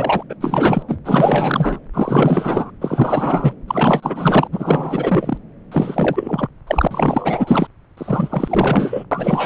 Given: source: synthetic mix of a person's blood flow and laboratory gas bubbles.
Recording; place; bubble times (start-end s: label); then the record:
Doppler ultrasound of blood flow; subclavian vein
0.00-0.23 s: bubbles
0.29-0.35 s: bubbles
0.40-0.82 s: bubbles
0.88-0.99 s: bubbles
1.05-1.79 s: bubbles
1.94-2.71 s: bubbles
2.81-3.53 s: bubbles
3.68-4.47 s: bubbles
4.52-5.38 s: bubbles
5.71-6.47 s: bubbles
6.67-6.88 s: bubbles
6.90-7.67 s: bubbles
7.97-9.04 s: bubbles
9.11-9.46 s: bubbles
From the record:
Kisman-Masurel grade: 444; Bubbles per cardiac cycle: continuous sound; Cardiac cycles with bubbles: 100%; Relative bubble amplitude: maximal (0.775 to 0.999); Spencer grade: 4 (maximum detectable bubble signal sounding continuously throughout systole and diastole of every cardiac period, and overriding the amplitude of the normal cardiac signals); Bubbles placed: anywhere in the cardiac cycle